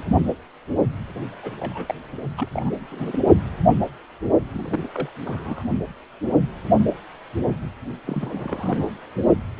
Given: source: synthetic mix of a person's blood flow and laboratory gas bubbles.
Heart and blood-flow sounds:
Doppler ultrasound of blood flow; precordium
1.43-1.52 s: bubbles
1.59-1.94 s: bubbles
2.38-2.48 s: bubbles
2.52-2.77 s: bubbles
2.92-3.19 s: bubbles
4.53-4.89 s: bubbles
4.94-5.09 s: bubbles
5.25-5.62 s: bubbles
8.04-8.88 s: bubbles
From the record:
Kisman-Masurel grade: 221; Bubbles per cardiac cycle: several, 3 to 8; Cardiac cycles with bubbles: 10 to 50%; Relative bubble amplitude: barely perceptible (0.100 to 0.250); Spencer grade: 2 (many but less than half of the cardiac periods contain bubble signals, singularly or in groups); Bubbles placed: only in the low amplitude regions of the cardiac cycle

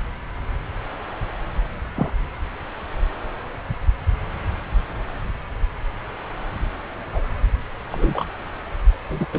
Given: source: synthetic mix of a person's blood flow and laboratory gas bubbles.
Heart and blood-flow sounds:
Doppler ultrasound of blood flow; subclavian vein
1.96-2.11 s: bubbles
7.13-7.21 s: bubbles
7.91-8.25 s: bubbles
9.09-9.27 s: bubbles
9.32-9.39 s: bubbles
From the record:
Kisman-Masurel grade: 122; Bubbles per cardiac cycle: 1 to 2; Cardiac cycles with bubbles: 10 to 50%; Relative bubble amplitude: moderate (0.250 to 0.450); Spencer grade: 2 (many but less than half of the cardiac periods contain bubble signals, singularly or in groups); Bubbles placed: anywhere in the cardiac cycle

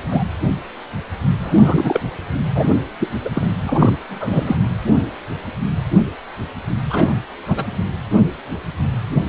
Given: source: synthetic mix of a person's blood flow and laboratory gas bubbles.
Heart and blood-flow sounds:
Doppler ultrasound of blood flow; precordium
0.11-0.23 s: bubbles
1.43-2.00 s: bubbles
2.55-2.68 s: bubbles
2.99-3.08 s: bubbles
3.24-3.29 s: bubbles
3.32-3.47 s: bubbles
3.61-3.97 s: bubbles
4.09-4.56 s: bubbles
6.89-7.16 s: bubbles
7.47-7.66 s: bubbles
From the record:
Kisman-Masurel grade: 233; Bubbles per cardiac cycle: several, 3 to 8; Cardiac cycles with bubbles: 50 to 99%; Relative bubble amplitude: loud (0.450 to 0.775); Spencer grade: 3 (all of the cardiac periods contain showers or single bubble signals, but not dominating or overriding the cardiac motion signals); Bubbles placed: anywhere in the cardiac cycle

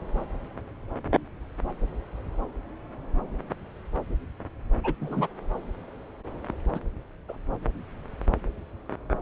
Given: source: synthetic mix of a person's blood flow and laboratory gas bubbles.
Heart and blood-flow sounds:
Doppler ultrasound of blood flow; subclavian vein
4.83-4.93 s: bubbles
5.00-5.27 s: bubbles
6.73-6.80 s: bubbles
7.28-7.37 s: bubbles
From the record:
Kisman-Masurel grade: 113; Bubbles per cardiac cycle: 1 to 2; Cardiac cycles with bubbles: 1 to 10%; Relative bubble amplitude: loud (0.450 to 0.775); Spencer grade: 1 (occasional bubble signal discernible with the cardiac motion signal, with majority of cardiac periods free of bubbles); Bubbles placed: anywhere in the cardiac cycle

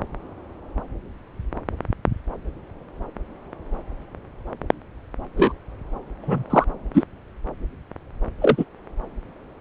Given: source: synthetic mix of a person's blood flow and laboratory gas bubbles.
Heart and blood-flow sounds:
Doppler ultrasound of blood flow; subclavian vein
5.37-5.52 s: bubbles
6.22-6.43 s: bubbles
6.50-6.64 s: bubbles
6.94-7.04 s: bubbles
8.41-8.65 s: bubbles
From the record:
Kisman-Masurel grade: 123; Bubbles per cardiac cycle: 1 to 2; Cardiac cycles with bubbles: 10 to 50%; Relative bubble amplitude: loud (0.450 to 0.775); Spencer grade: 2 (many but less than half of the cardiac periods contain bubble signals, singularly or in groups); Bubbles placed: anywhere in the cardiac cycle

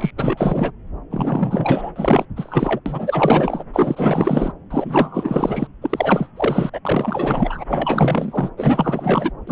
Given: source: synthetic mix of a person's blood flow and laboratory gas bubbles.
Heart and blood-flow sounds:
Doppler ultrasound of blood flow; subclavian vein
0.00-0.10 s: bubbles
0.17-0.71 s: bubbles
1.10-1.91 s: bubbles
1.95-2.26 s: bubbles
2.36-2.80 s: bubbles
2.85-3.64 s: bubbles
3.73-4.53 s: bubbles
4.70-5.67 s: bubbles
5.81-6.29 s: bubbles
6.36-6.70 s: bubbles
6.73-6.80 s: bubbles
6.85-7.64 s: bubbles
7.67-8.50 s: bubbles
8.57-9.32 s: bubbles
9.47-9.52 s: bubbles
From the record:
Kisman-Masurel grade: 444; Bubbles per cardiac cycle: continuous sound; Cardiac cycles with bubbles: 100%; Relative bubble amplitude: maximal (0.775 to 0.999); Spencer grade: 4 (maximum detectable bubble signal sounding continuously throughout systole and diastole of every cardiac period, and overriding the amplitude of the normal cardiac signals); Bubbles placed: anywhere in the cardiac cycle

